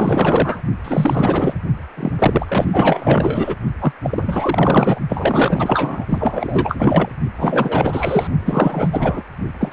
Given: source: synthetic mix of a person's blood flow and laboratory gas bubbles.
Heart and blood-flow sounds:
Doppler ultrasound of blood flow; precordium
0.00-0.60 s: bubbles
0.84-1.54 s: bubbles
1.97-2.12 s: bubbles
2.19-3.55 s: bubbles
3.81-3.92 s: bubbles
4.04-5.00 s: bubbles
5.08-6.06 s: bubbles
6.09-7.09 s: bubbles
7.38-8.28 s: bubbles
8.40-9.22 s: bubbles
9.60-9.72 s: bubbles
From the record:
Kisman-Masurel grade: 444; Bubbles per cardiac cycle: continuous sound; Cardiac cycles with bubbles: 100%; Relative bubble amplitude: maximal (0.775 to 0.999); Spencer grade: 4 (maximum detectable bubble signal sounding continuously throughout systole and diastole of every cardiac period, and overriding the amplitude of the normal cardiac signals); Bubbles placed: only in the low amplitude regions of the cardiac cycle

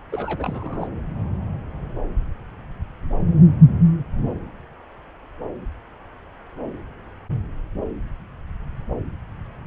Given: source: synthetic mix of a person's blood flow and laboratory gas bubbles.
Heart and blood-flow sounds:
Doppler ultrasound of blood flow; subclavian vein
0.11-0.87 s: bubbles
From the record:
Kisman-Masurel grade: 211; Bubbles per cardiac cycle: several, 3 to 8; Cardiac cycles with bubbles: 1 to 10%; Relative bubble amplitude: barely perceptible (0.100 to 0.250); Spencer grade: 1 (occasional bubble signal discernible with the cardiac motion signal, with majority of cardiac periods free of bubbles); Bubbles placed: anywhere in the cardiac cycle

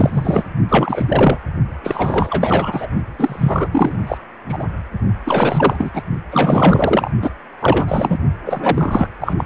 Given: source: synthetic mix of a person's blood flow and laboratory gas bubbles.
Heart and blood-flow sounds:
Doppler ultrasound of blood flow; precordium
0.00-0.43 s: bubbles
0.68-1.38 s: bubbles
1.83-2.88 s: bubbles
3.19-3.69 s: bubbles
3.72-3.97 s: bubbles
4.07-4.17 s: bubbles
4.49-4.65 s: bubbles
5.25-5.91 s: bubbles
5.93-6.03 s: bubbles
6.30-7.11 s: bubbles
7.21-7.31 s: bubbles
7.60-8.18 s: bubbles
8.46-9.08 s: bubbles
9.21-9.34 s: bubbles
9.37-9.45 s: bubbles
From the record:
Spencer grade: 4 (maximum detectable bubble signal sounding continuously throughout systole and diastole of every cardiac period, and overriding the amplitude of the normal cardiac signals); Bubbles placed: only in the low amplitude regions of the cardiac cycle

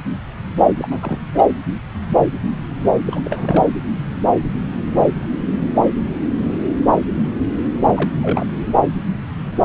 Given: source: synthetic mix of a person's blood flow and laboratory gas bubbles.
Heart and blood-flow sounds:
Doppler ultrasound of blood flow; subclavian vein
0.78-1.18 s: bubbles
1.34-1.43 s: bubbles
3.06-3.20 s: bubbles
3.24-3.67 s: bubbles
7.75-8.10 s: bubbles
8.22-8.46 s: bubbles
From the record:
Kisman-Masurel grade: 222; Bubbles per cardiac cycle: several, 3 to 8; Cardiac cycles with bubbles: 10 to 50%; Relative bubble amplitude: moderate (0.250 to 0.450); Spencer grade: 2 (many but less than half of the cardiac periods contain bubble signals, singularly or in groups); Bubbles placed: anywhere in the cardiac cycle

